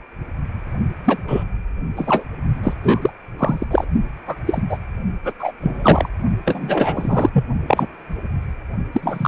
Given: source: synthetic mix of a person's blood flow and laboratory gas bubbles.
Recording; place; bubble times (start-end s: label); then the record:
Doppler ultrasound of blood flow; precordium
1.04-1.18 s: bubbles
1.27-1.44 s: bubbles
1.96-2.23 s: bubbles
2.63-2.73 s: bubbles
2.83-3.10 s: bubbles
3.38-3.65 s: bubbles
3.71-3.85 s: bubbles
4.27-4.36 s: bubbles
4.46-4.61 s: bubbles
4.69-4.78 s: bubbles
5.23-5.33 s: bubbles
5.38-5.52 s: bubbles
5.61-6.09 s: bubbles
6.46-7.29 s: bubbles
7.32-7.45 s: bubbles
7.67-7.88 s: bubbles
8.93-9.28 s: bubbles
From the record:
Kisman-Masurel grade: 233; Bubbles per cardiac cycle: several, 3 to 8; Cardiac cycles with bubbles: 50 to 99%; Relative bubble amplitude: loud (0.450 to 0.775); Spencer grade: 3 (all of the cardiac periods contain showers or single bubble signals, but not dominating or overriding the cardiac motion signals); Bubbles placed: only in the low amplitude regions of the cardiac cycle